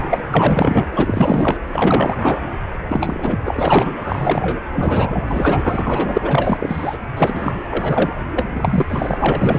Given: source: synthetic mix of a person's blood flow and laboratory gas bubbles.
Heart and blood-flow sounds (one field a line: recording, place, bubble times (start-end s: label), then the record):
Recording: Doppler ultrasound of blood flow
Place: precordium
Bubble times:
0.00-0.22 s: bubbles
0.26-0.88 s: bubbles
0.94-1.58 s: bubbles
1.70-2.40 s: bubbles
2.88-3.40 s: bubbles
3.45-3.94 s: bubbles
4.01-4.61 s: bubbles
4.72-5.23 s: bubbles
5.28-6.18 s: bubbles
6.21-6.98 s: bubbles
7.16-7.53 s: bubbles
7.71-8.13 s: bubbles
8.35-9.59 s: bubbles
From the record:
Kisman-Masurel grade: 444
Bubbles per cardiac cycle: continuous sound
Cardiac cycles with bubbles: 100%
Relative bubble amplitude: maximal (0.775 to 0.999)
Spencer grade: 4 (maximum detectable bubble signal sounding continuously throughout systole and diastole of every cardiac period, and overriding the amplitude of the normal cardiac signals)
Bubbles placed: anywhere in the cardiac cycle